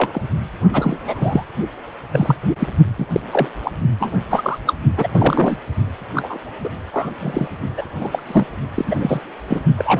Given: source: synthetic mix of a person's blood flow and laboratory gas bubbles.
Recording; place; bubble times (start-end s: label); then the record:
Doppler ultrasound of blood flow; precordium
0.00-0.21 s: bubbles
0.72-0.98 s: bubbles
1.01-1.45 s: bubbles
2.12-2.37 s: bubbles
2.58-2.67 s: bubbles
2.98-3.06 s: bubbles
3.10-3.21 s: bubbles
3.31-3.48 s: bubbles
3.62-3.71 s: bubbles
4.00-4.17 s: bubbles
4.30-4.58 s: bubbles
4.67-4.74 s: bubbles
4.97-5.08 s: bubbles
5.13-5.57 s: bubbles
6.14-6.38 s: bubbles
6.63-6.70 s: bubbles
6.93-7.12 s: bubbles
7.20-7.48 s: bubbles
7.77-7.86 s: bubbles
8.00-8.23 s: bubbles
8.27-8.46 s: bubbles
8.74-9.20 s: bubbles
9.49-9.60 s: bubbles
9.77-10.00 s: bubbles
From the record:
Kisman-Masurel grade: 243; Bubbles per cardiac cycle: several, 3 to 8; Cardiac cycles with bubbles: 100%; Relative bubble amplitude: loud (0.450 to 0.775); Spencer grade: 3 (all of the cardiac periods contain showers or single bubble signals, but not dominating or overriding the cardiac motion signals); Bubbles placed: only in the low amplitude regions of the cardiac cycle